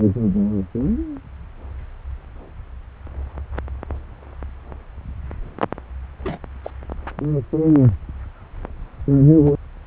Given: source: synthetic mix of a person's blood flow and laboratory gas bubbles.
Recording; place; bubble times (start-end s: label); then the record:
Doppler ultrasound of blood flow; subclavian vein
6.24-6.39 s: bubbles
6.63-6.71 s: bubbles
9.46-9.53 s: bubbles
From the record:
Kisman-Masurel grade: 121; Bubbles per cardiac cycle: 1 to 2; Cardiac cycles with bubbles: 10 to 50%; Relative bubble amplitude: barely perceptible (0.100 to 0.250); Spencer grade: 2 (many but less than half of the cardiac periods contain bubble signals, singularly or in groups); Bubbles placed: anywhere in the cardiac cycle